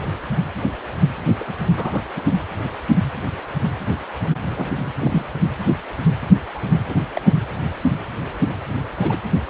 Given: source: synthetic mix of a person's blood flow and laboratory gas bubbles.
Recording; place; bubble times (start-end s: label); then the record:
Doppler ultrasound of blood flow; precordium
1.40-1.53 s: bubbles
1.77-2.02 s: bubbles
2.16-2.21 s: bubbles
4.51-4.79 s: bubbles
5.00-5.25 s: bubbles
6.50-6.62 s: bubbles
6.90-6.95 s: bubbles
7.15-7.21 s: bubbles
9.01-9.18 s: bubbles
From the record:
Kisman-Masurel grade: 122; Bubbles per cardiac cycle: 1 to 2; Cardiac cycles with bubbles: 10 to 50%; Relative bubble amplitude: moderate (0.250 to 0.450); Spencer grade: 2 (many but less than half of the cardiac periods contain bubble signals, singularly or in groups); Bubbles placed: anywhere in the cardiac cycle